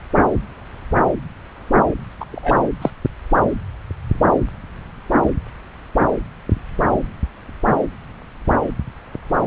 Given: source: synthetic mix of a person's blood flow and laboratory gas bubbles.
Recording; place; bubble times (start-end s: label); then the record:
Doppler ultrasound of blood flow; subclavian vein
2.20-2.25 s: bubbles
2.31-2.62 s: bubbles
2.81-2.90 s: bubbles
From the record:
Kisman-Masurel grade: 123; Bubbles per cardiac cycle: 1 to 2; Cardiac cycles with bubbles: 10 to 50%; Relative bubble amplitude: loud (0.450 to 0.775); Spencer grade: 2 (many but less than half of the cardiac periods contain bubble signals, singularly or in groups); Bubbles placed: anywhere in the cardiac cycle